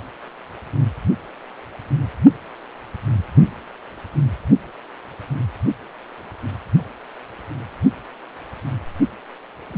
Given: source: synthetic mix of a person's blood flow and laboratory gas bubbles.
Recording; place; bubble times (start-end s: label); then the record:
Doppler ultrasound of blood flow; precordium
9.72-9.78 s: bubbles
From the record:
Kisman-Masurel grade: 111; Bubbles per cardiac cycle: 1 to 2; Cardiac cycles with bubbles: 1 to 10%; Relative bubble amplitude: barely perceptible (0.100 to 0.250); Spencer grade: 1 (occasional bubble signal discernible with the cardiac motion signal, with majority of cardiac periods free of bubbles); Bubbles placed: only in the low amplitude regions of the cardiac cycle